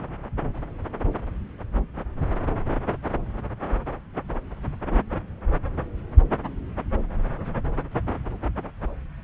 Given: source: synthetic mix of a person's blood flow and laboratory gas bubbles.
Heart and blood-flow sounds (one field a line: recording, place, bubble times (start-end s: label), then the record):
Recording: Doppler ultrasound of blood flow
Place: subclavian vein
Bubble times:
0.00-0.14 s: bubbles
From the record:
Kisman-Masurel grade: 111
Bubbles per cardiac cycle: 1 to 2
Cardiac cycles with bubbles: 1 to 10%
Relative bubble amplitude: barely perceptible (0.100 to 0.250)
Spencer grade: 1 (occasional bubble signal discernible with the cardiac motion signal, with majority of cardiac periods free of bubbles)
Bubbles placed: anywhere in the cardiac cycle